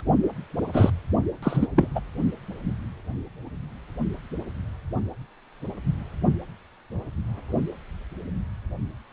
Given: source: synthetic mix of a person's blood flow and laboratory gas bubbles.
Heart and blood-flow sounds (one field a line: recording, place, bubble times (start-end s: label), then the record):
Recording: Doppler ultrasound of blood flow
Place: precordium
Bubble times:
0.73-0.90 s: bubbles
1.42-1.67 s: bubbles
1.77-1.88 s: bubbles
1.95-2.00 s: bubbles
From the record:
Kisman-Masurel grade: 222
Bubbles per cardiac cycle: several, 3 to 8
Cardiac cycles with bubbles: 10 to 50%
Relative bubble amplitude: moderate (0.250 to 0.450)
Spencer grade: 2 (many but less than half of the cardiac periods contain bubble signals, singularly or in groups)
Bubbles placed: only in the low amplitude regions of the cardiac cycle